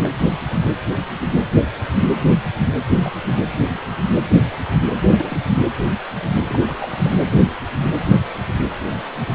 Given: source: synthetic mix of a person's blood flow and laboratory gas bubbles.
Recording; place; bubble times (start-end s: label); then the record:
Doppler ultrasound of blood flow; precordium
0.00-0.15 s: bubbles
2.97-3.12 s: bubbles
3.27-3.41 s: bubbles
5.03-5.42 s: bubbles
6.48-7.17 s: bubbles
From the record:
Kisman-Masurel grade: 221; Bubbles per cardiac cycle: several, 3 to 8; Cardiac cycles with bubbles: 10 to 50%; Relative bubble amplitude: barely perceptible (0.100 to 0.250); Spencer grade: 2 (many but less than half of the cardiac periods contain bubble signals, singularly or in groups); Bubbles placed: anywhere in the cardiac cycle